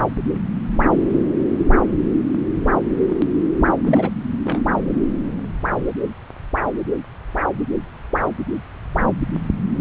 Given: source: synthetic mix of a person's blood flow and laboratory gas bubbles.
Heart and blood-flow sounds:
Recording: Doppler ultrasound of blood flow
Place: subclavian vein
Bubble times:
3.83-4.10 s: bubbles
4.44-4.62 s: bubbles
4.77-4.83 s: bubbles
From the record:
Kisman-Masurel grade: 222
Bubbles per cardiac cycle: several, 3 to 8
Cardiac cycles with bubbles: 10 to 50%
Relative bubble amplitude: moderate (0.250 to 0.450)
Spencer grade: 2 (many but less than half of the cardiac periods contain bubble signals, singularly or in groups)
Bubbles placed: anywhere in the cardiac cycle

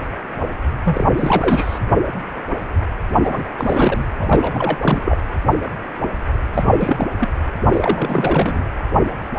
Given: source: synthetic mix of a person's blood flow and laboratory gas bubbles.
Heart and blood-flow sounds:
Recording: Doppler ultrasound of blood flow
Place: precordium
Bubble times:
0.84-1.04 s: bubbles
1.17-1.79 s: bubbles
3.23-3.44 s: bubbles
3.57-4.05 s: bubbles
4.20-5.02 s: bubbles
5.05-5.17 s: bubbles
6.54-7.08 s: bubbles
7.20-7.28 s: bubbles
7.72-8.64 s: bubbles
From the record:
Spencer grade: 3 (all of the cardiac periods contain showers or single bubble signals, but not dominating or overriding the cardiac motion signals)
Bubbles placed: anywhere in the cardiac cycle

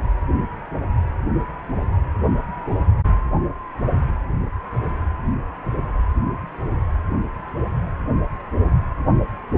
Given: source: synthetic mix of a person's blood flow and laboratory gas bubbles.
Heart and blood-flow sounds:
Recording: Doppler ultrasound of blood flow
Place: precordium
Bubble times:
no bubbles
From the record:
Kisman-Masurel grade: 000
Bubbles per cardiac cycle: 0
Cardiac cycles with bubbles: 0%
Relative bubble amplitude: no bubbles discernible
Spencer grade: 0 (complete lack of bubble signals)

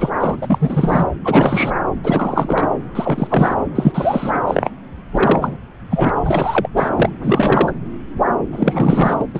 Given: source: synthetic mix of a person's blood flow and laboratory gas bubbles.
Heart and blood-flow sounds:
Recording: Doppler ultrasound of blood flow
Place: subclavian vein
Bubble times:
0.00-0.09 s: bubbles
0.16-0.37 s: bubbles
0.41-1.06 s: bubbles
1.24-1.83 s: bubbles
2.04-2.68 s: bubbles
2.95-3.55 s: bubbles
3.75-4.38 s: bubbles
4.47-4.69 s: bubbles
5.13-5.57 s: bubbles
5.89-6.09 s: bubbles
6.15-6.21 s: bubbles
6.25-6.68 s: bubbles
6.76-6.90 s: bubbles
6.96-7.09 s: bubbles
7.22-7.74 s: bubbles
8.52-9.25 s: bubbles
9.34-9.40 s: bubbles
From the record:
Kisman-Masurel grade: 333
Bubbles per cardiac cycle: rolling drumbeat, 9 or more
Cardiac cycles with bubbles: 50 to 99%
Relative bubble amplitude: loud (0.450 to 0.775)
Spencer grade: 3 (all of the cardiac periods contain showers or single bubble signals, but not dominating or overriding the cardiac motion signals)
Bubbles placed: anywhere in the cardiac cycle

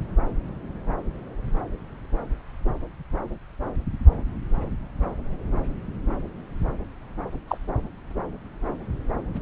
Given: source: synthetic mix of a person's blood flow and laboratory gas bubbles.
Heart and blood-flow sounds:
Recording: Doppler ultrasound of blood flow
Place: subclavian vein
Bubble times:
7.47-7.58 s: bubbles
From the record:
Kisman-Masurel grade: 112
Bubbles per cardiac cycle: 1 to 2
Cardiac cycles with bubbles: 1 to 10%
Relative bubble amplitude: moderate (0.250 to 0.450)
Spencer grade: 1 (occasional bubble signal discernible with the cardiac motion signal, with majority of cardiac periods free of bubbles)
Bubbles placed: anywhere in the cardiac cycle

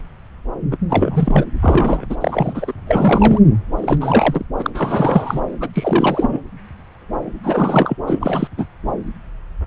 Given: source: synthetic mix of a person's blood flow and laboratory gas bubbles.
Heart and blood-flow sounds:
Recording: Doppler ultrasound of blood flow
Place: subclavian vein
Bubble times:
0.71-0.78 s: bubbles
0.89-1.45 s: bubbles
1.62-2.06 s: bubbles
2.09-2.16 s: bubbles
2.21-2.72 s: bubbles
2.87-3.39 s: bubbles
3.76-3.98 s: bubbles
4.00-4.45 s: bubbles
4.58-4.71 s: bubbles
4.75-5.40 s: bubbles
5.60-5.69 s: bubbles
5.74-6.39 s: bubbles
7.43-7.97 s: bubbles
8.07-8.48 s: bubbles
8.57-8.66 s: bubbles
From the record:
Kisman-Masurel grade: 333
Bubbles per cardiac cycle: rolling drumbeat, 9 or more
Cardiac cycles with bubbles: 50 to 99%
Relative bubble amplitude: loud (0.450 to 0.775)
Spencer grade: 3 (all of the cardiac periods contain showers or single bubble signals, but not dominating or overriding the cardiac motion signals)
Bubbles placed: anywhere in the cardiac cycle

